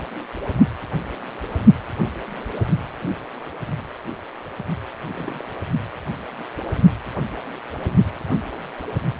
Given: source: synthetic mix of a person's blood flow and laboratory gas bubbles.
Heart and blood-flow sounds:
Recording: Doppler ultrasound of blood flow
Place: precordium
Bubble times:
5.06-5.42 s: bubbles
From the record:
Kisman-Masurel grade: 211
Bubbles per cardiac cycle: several, 3 to 8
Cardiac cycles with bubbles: 1 to 10%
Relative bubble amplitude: barely perceptible (0.100 to 0.250)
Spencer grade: 1 (occasional bubble signal discernible with the cardiac motion signal, with majority of cardiac periods free of bubbles)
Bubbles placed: anywhere in the cardiac cycle

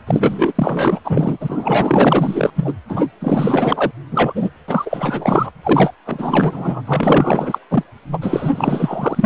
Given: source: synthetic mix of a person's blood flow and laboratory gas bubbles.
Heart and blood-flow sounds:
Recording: Doppler ultrasound of blood flow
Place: precordium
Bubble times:
0.07-0.52 s: bubbles
0.55-1.00 s: bubbles
1.04-1.38 s: bubbles
1.40-2.50 s: bubbles
2.56-2.75 s: bubbles
2.89-3.06 s: bubbles
3.21-3.91 s: bubbles
4.11-4.50 s: bubbles
4.68-5.50 s: bubbles
5.63-5.92 s: bubbles
6.05-6.82 s: bubbles
6.87-7.58 s: bubbles
7.69-7.83 s: bubbles
8.12-8.18 s: bubbles
8.21-9.26 s: bubbles
From the record:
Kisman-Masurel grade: 444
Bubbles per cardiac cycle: continuous sound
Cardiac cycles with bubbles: 100%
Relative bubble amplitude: maximal (0.775 to 0.999)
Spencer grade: 4 (maximum detectable bubble signal sounding continuously throughout systole and diastole of every cardiac period, and overriding the amplitude of the normal cardiac signals)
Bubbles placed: anywhere in the cardiac cycle

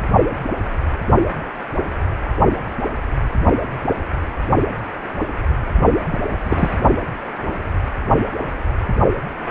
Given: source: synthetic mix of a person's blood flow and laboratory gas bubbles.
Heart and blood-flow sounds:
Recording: Doppler ultrasound of blood flow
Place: precordium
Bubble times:
6.10-6.21 s: bubbles
6.41-6.77 s: bubbles
From the record:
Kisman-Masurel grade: 212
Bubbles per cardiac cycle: several, 3 to 8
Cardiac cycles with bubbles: 1 to 10%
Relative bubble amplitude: moderate (0.250 to 0.450)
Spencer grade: 1 (occasional bubble signal discernible with the cardiac motion signal, with majority of cardiac periods free of bubbles)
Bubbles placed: only in the low amplitude regions of the cardiac cycle

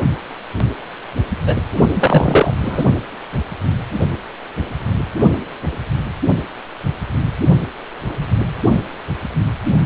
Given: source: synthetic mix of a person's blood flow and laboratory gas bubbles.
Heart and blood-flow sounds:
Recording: Doppler ultrasound of blood flow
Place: precordium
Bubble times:
1.46-1.56 s: bubbles
1.94-2.54 s: bubbles
2.64-2.84 s: bubbles
From the record:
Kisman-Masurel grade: 213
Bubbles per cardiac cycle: several, 3 to 8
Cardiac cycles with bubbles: 1 to 10%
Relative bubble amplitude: loud (0.450 to 0.775)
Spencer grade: 1 (occasional bubble signal discernible with the cardiac motion signal, with majority of cardiac periods free of bubbles)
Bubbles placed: anywhere in the cardiac cycle

